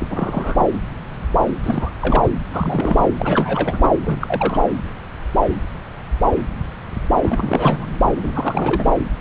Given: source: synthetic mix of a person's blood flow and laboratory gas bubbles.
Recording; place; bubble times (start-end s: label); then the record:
Doppler ultrasound of blood flow; subclavian vein
0.00-0.07 s: bubbles
0.10-0.65 s: bubbles
1.64-1.89 s: bubbles
2.00-2.28 s: bubbles
2.50-3.08 s: bubbles
3.17-3.91 s: bubbles
4.03-4.62 s: bubbles
7.21-7.86 s: bubbles
8.09-8.92 s: bubbles
From the record:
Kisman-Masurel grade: 332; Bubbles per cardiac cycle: rolling drumbeat, 9 or more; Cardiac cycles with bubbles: 50 to 99%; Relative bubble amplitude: moderate (0.250 to 0.450); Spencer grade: 3 (all of the cardiac periods contain showers or single bubble signals, but not dominating or overriding the cardiac motion signals); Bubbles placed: anywhere in the cardiac cycle